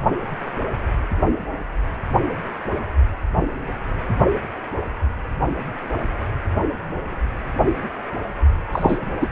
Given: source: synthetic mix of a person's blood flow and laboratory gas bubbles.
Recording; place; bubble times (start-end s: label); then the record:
Doppler ultrasound of blood flow; precordium
8.71-8.98 s: bubbles
9.21-9.27 s: bubbles
From the record:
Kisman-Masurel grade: 212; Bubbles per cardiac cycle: several, 3 to 8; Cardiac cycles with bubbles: 1 to 10%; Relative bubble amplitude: moderate (0.250 to 0.450); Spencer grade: 1 (occasional bubble signal discernible with the cardiac motion signal, with majority of cardiac periods free of bubbles); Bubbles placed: anywhere in the cardiac cycle